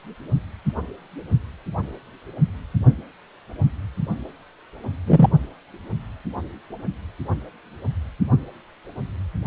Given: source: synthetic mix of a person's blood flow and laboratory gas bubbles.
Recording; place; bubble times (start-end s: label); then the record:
Doppler ultrasound of blood flow; precordium
5.07-5.28 s: bubbles
From the record:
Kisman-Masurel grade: 113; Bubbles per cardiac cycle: 1 to 2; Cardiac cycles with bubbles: 1 to 10%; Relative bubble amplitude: loud (0.450 to 0.775); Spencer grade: 1 (occasional bubble signal discernible with the cardiac motion signal, with majority of cardiac periods free of bubbles); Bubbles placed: only in the low amplitude regions of the cardiac cycle